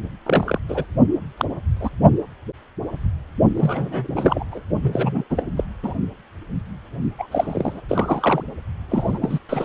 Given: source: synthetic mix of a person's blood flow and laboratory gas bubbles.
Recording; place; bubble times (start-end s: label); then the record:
Doppler ultrasound of blood flow; precordium
0.26-0.59 s: bubbles
0.68-0.85 s: bubbles
1.38-1.45 s: bubbles
1.80-1.90 s: bubbles
3.56-4.08 s: bubbles
4.15-4.45 s: bubbles
4.51-4.61 s: bubbles
4.82-5.24 s: bubbles
5.30-5.44 s: bubbles
5.57-5.64 s: bubbles
5.83-5.94 s: bubbles
7.18-7.27 s: bubbles
7.31-7.81 s: bubbles
7.89-8.44 s: bubbles
8.89-9.19 s: bubbles
9.21-9.39 s: bubbles
9.49-9.65 s: bubbles
From the record:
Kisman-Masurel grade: 232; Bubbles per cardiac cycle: several, 3 to 8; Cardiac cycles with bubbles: 50 to 99%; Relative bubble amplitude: moderate (0.250 to 0.450); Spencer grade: 3 (all of the cardiac periods contain showers or single bubble signals, but not dominating or overriding the cardiac motion signals); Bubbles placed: only in the low amplitude regions of the cardiac cycle